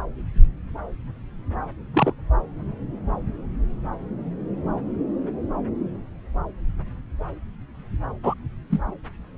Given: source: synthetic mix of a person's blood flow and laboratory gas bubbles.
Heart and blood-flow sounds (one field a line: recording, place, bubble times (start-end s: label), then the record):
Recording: Doppler ultrasound of blood flow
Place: subclavian vein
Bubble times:
1.94-2.12 s: bubbles
8.22-8.34 s: bubbles
8.70-8.82 s: bubbles
From the record:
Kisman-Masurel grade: 122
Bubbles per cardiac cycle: 1 to 2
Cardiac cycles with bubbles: 10 to 50%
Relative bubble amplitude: moderate (0.250 to 0.450)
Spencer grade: 2 (many but less than half of the cardiac periods contain bubble signals, singularly or in groups)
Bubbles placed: anywhere in the cardiac cycle